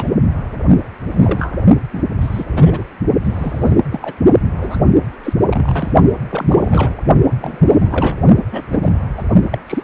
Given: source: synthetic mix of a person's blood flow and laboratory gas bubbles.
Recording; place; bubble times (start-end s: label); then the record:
Doppler ultrasound of blood flow; precordium
0.00-0.11 s: bubbles
1.10-1.57 s: bubbles
1.92-2.06 s: bubbles
2.21-2.44 s: bubbles
2.53-2.84 s: bubbles
3.24-3.78 s: bubbles
3.92-4.00 s: bubbles
4.02-4.13 s: bubbles
4.57-4.84 s: bubbles
5.23-5.33 s: bubbles
5.50-5.92 s: bubbles
6.30-6.95 s: bubbles
7.30-8.17 s: bubbles
8.51-8.62 s: bubbles
8.71-9.02 s: bubbles
9.17-9.23 s: bubbles
9.50-9.58 s: bubbles
9.67-9.82 s: bubbles
From the record:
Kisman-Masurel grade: 242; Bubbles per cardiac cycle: several, 3 to 8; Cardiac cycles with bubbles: 100%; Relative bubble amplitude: moderate (0.250 to 0.450); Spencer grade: 3 (all of the cardiac periods contain showers or single bubble signals, but not dominating or overriding the cardiac motion signals); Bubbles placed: only in the low amplitude regions of the cardiac cycle